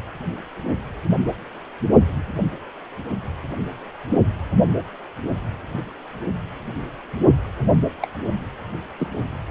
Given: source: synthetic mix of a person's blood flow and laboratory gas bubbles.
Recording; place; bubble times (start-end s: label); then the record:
Doppler ultrasound of blood flow; precordium
8.01-8.08 s: bubbles
8.99-9.08 s: bubbles
From the record:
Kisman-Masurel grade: 111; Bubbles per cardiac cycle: 1 to 2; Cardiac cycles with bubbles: 1 to 10%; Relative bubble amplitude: barely perceptible (0.100 to 0.250); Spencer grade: 1 (occasional bubble signal discernible with the cardiac motion signal, with majority of cardiac periods free of bubbles); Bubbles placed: only in the low amplitude regions of the cardiac cycle